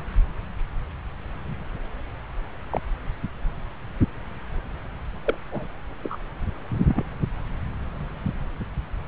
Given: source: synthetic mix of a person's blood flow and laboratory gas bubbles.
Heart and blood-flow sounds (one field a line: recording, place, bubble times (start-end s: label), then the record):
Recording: Doppler ultrasound of blood flow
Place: subclavian vein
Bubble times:
2.70-2.80 s: bubbles
5.25-5.38 s: bubbles
5.52-5.66 s: bubbles
6.03-6.19 s: bubbles
6.88-7.03 s: bubbles
From the record:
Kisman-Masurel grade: 122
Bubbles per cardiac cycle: 1 to 2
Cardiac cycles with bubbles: 10 to 50%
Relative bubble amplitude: moderate (0.250 to 0.450)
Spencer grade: 2 (many but less than half of the cardiac periods contain bubble signals, singularly or in groups)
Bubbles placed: anywhere in the cardiac cycle